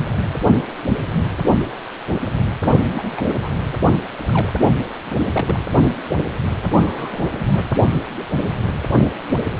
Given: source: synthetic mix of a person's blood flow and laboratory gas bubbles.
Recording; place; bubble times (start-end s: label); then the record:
Doppler ultrasound of blood flow; precordium
2.66-2.77 s: bubbles
2.95-3.36 s: bubbles
3.42-3.49 s: bubbles
4.26-4.53 s: bubbles
5.10-5.16 s: bubbles
5.32-5.59 s: bubbles
6.75-7.20 s: bubbles
7.38-7.67 s: bubbles
From the record:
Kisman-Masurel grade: 221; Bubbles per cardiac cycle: several, 3 to 8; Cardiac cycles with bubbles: 10 to 50%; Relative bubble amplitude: barely perceptible (0.100 to 0.250); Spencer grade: 2 (many but less than half of the cardiac periods contain bubble signals, singularly or in groups); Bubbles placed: anywhere in the cardiac cycle